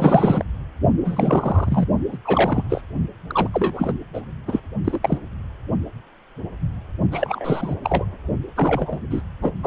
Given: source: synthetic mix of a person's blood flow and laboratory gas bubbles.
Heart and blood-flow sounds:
Doppler ultrasound of blood flow; precordium
0.00-0.43 s: bubbles
1.04-1.86 s: bubbles
2.12-2.17 s: bubbles
2.25-2.63 s: bubbles
2.69-2.81 s: bubbles
3.30-3.48 s: bubbles
3.52-3.93 s: bubbles
4.13-4.22 s: bubbles
4.48-4.60 s: bubbles
4.84-4.99 s: bubbles
5.03-5.18 s: bubbles
7.12-7.75 s: bubbles
7.84-8.05 s: bubbles
8.55-8.99 s: bubbles
9.10-9.22 s: bubbles
9.41-9.51 s: bubbles
9.63-9.67 s: bubbles
From the record:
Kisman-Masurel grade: 232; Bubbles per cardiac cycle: several, 3 to 8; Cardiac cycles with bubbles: 50 to 99%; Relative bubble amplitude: moderate (0.250 to 0.450); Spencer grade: 3 (all of the cardiac periods contain showers or single bubble signals, but not dominating or overriding the cardiac motion signals); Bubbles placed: only in the low amplitude regions of the cardiac cycle

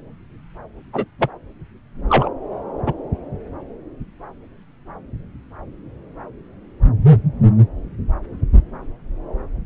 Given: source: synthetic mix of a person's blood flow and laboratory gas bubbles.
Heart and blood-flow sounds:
Doppler ultrasound of blood flow; subclavian vein
0.93-1.05 s: bubbles
1.19-1.29 s: bubbles
2.08-2.29 s: bubbles
2.85-2.93 s: bubbles
From the record:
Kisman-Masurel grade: 123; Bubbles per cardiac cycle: 1 to 2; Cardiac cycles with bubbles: 10 to 50%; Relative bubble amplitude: loud (0.450 to 0.775); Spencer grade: 2 (many but less than half of the cardiac periods contain bubble signals, singularly or in groups); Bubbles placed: anywhere in the cardiac cycle

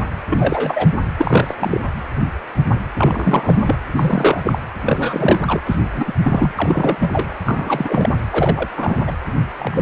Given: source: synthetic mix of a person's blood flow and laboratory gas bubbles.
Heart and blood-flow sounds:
Doppler ultrasound of blood flow; precordium
0.29-0.88 s: bubbles
1.18-1.55 s: bubbles
1.59-1.89 s: bubbles
2.97-3.75 s: bubbles
3.96-4.58 s: bubbles
4.83-5.62 s: bubbles
5.66-5.76 s: bubbles
5.84-6.13 s: bubbles
6.23-6.51 s: bubbles
6.58-6.97 s: bubbles
7.00-7.35 s: bubbles
7.45-8.15 s: bubbles
8.30-8.68 s: bubbles
8.77-9.02 s: bubbles
9.06-9.12 s: bubbles
9.59-9.82 s: bubbles
From the record:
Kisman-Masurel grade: 333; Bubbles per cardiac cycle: rolling drumbeat, 9 or more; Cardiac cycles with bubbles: 50 to 99%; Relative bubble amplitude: loud (0.450 to 0.775); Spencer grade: 3 (all of the cardiac periods contain showers or single bubble signals, but not dominating or overriding the cardiac motion signals); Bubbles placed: anywhere in the cardiac cycle

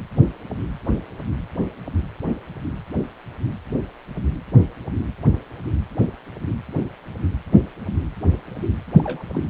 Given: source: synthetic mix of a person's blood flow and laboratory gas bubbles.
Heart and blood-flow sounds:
Doppler ultrasound of blood flow; precordium
8.99-9.23 s: bubbles
9.32-9.42 s: bubbles
From the record:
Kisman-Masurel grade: 111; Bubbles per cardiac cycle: 1 to 2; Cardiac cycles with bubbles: 1 to 10%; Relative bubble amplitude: barely perceptible (0.100 to 0.250); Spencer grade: 1 (occasional bubble signal discernible with the cardiac motion signal, with majority of cardiac periods free of bubbles); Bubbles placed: anywhere in the cardiac cycle

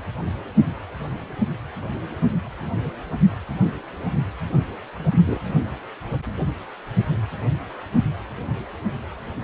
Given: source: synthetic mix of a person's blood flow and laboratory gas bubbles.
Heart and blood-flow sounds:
Doppler ultrasound of blood flow; precordium
5.11-5.40 s: bubbles
From the record:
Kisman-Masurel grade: 113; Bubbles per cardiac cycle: 1 to 2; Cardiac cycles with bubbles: 1 to 10%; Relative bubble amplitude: loud (0.450 to 0.775); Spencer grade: 1 (occasional bubble signal discernible with the cardiac motion signal, with majority of cardiac periods free of bubbles); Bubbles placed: anywhere in the cardiac cycle

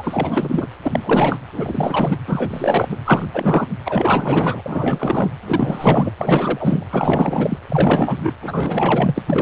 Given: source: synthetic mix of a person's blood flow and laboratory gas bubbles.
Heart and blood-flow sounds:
Doppler ultrasound of blood flow; precordium
0.00-0.68 s: bubbles
0.82-1.38 s: bubbles
1.52-2.17 s: bubbles
2.27-2.88 s: bubbles
2.91-2.96 s: bubbles
3.04-3.25 s: bubbles
3.33-3.67 s: bubbles
3.85-4.62 s: bubbles
4.66-5.33 s: bubbles
5.48-6.11 s: bubbles
6.18-6.85 s: bubbles
6.90-7.59 s: bubbles
7.69-8.31 s: bubbles
8.40-9.22 s: bubbles
9.26-9.42 s: bubbles
From the record:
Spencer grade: 4 (maximum detectable bubble signal sounding continuously throughout systole and diastole of every cardiac period, and overriding the amplitude of the normal cardiac signals); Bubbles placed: anywhere in the cardiac cycle

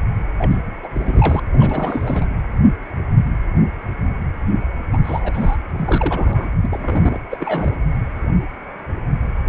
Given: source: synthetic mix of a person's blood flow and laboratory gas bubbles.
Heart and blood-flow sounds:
Doppler ultrasound of blood flow; precordium
0.38-0.57 s: bubbles
0.82-0.88 s: bubbles
0.94-1.40 s: bubbles
1.53-2.27 s: bubbles
4.93-4.99 s: bubbles
5.04-5.57 s: bubbles
5.78-6.46 s: bubbles
6.62-7.19 s: bubbles
7.30-7.38 s: bubbles
7.40-7.74 s: bubbles
From the record:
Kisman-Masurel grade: 332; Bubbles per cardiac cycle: rolling drumbeat, 9 or more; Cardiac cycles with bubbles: 50 to 99%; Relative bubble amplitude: moderate (0.250 to 0.450); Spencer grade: 3 (all of the cardiac periods contain showers or single bubble signals, but not dominating or overriding the cardiac motion signals); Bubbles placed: anywhere in the cardiac cycle

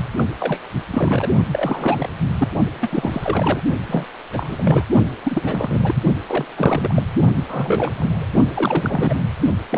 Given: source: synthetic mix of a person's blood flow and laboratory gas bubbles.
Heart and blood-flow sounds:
Doppler ultrasound of blood flow; precordium
0.00-0.04 s: bubbles
0.18-0.26 s: bubbles
0.40-0.60 s: bubbles
0.90-1.29 s: bubbles
1.51-2.09 s: bubbles
2.38-2.48 s: bubbles
2.81-3.61 s: bubbles
3.88-4.05 s: bubbles
4.33-4.83 s: bubbles
5.23-6.01 s: bubbles
6.26-6.46 s: bubbles
6.55-7.03 s: bubbles
7.36-7.43 s: bubbles
7.48-8.26 s: bubbles
8.54-9.27 s: bubbles
9.69-9.78 s: bubbles
From the record:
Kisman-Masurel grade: 332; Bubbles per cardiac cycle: rolling drumbeat, 9 or more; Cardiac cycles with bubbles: 50 to 99%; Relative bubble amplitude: moderate (0.250 to 0.450); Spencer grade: 3 (all of the cardiac periods contain showers or single bubble signals, but not dominating or overriding the cardiac motion signals); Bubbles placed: only in the low amplitude regions of the cardiac cycle

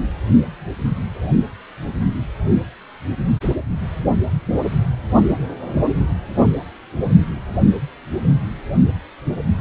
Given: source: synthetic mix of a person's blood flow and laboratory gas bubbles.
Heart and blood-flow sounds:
Doppler ultrasound of blood flow; precordium
no bubbles
From the record:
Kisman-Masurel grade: 000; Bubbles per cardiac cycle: 0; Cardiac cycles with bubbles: 0%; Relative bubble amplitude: no bubbles discernible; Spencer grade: 0 (complete lack of bubble signals)

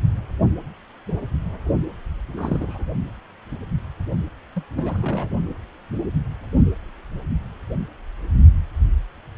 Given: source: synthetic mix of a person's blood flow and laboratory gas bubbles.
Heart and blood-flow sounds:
Doppler ultrasound of blood flow; precordium
2.36-2.84 s: bubbles
4.55-4.63 s: bubbles
4.75-5.29 s: bubbles
From the record:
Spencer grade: 2 (many but less than half of the cardiac periods contain bubble signals, singularly or in groups); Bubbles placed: only in the low amplitude regions of the cardiac cycle

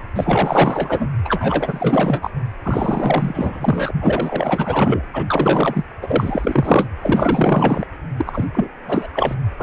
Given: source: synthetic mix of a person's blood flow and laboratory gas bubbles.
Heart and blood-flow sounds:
Doppler ultrasound of blood flow; precordium
0.15-1.07 s: bubbles
1.24-2.30 s: bubbles
2.63-3.91 s: bubbles
4.00-5.03 s: bubbles
5.13-5.84 s: bubbles
6.02-6.89 s: bubbles
7.00-7.87 s: bubbles
8.16-8.47 s: bubbles
8.54-8.69 s: bubbles
8.87-9.07 s: bubbles
9.13-9.35 s: bubbles
9.58-9.62 s: bubbles
From the record:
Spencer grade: 4 (maximum detectable bubble signal sounding continuously throughout systole and diastole of every cardiac period, and overriding the amplitude of the normal cardiac signals); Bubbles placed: anywhere in the cardiac cycle

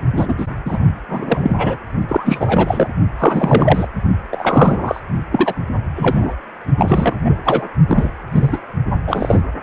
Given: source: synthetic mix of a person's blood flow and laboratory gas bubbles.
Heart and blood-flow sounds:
Doppler ultrasound of blood flow; precordium
0.16-0.34 s: bubbles
0.38-0.47 s: bubbles
0.65-0.78 s: bubbles
1.08-1.76 s: bubbles
2.08-2.89 s: bubbles
3.19-3.88 s: bubbles
4.31-5.00 s: bubbles
5.31-5.54 s: bubbles
5.95-6.36 s: bubbles
6.77-7.16 s: bubbles
7.25-7.65 s: bubbles
7.88-8.11 s: bubbles
8.31-8.59 s: bubbles
9.07-9.41 s: bubbles
From the record:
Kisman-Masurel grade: 243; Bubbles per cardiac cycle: several, 3 to 8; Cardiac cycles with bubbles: 100%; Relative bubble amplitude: loud (0.450 to 0.775); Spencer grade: 3 (all of the cardiac periods contain showers or single bubble signals, but not dominating or overriding the cardiac motion signals); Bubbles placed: only in the low amplitude regions of the cardiac cycle

